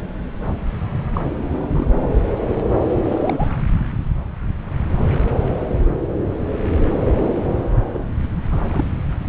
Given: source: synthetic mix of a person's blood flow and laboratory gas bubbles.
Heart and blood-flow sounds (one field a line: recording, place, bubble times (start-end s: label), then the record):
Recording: Doppler ultrasound of blood flow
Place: subclavian vein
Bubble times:
1.11-1.22 s: bubbles
1.56-2.07 s: bubbles
2.49-2.54 s: bubbles
3.11-3.48 s: bubbles
7.94-7.99 s: bubbles
8.50-8.85 s: bubbles
From the record:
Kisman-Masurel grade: 122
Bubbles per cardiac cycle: 1 to 2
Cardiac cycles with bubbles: 10 to 50%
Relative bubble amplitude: moderate (0.250 to 0.450)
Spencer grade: 2 (many but less than half of the cardiac periods contain bubble signals, singularly or in groups)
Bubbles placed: anywhere in the cardiac cycle